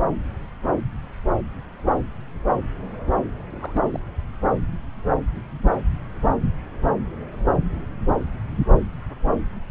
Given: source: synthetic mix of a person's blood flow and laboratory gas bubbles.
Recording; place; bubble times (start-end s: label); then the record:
Doppler ultrasound of blood flow; subclavian vein
3.50-3.82 s: bubbles
3.85-3.98 s: bubbles
From the record:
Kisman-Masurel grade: 211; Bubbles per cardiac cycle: several, 3 to 8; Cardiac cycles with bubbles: 1 to 10%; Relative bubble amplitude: barely perceptible (0.100 to 0.250); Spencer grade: 1 (occasional bubble signal discernible with the cardiac motion signal, with majority of cardiac periods free of bubbles); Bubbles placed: anywhere in the cardiac cycle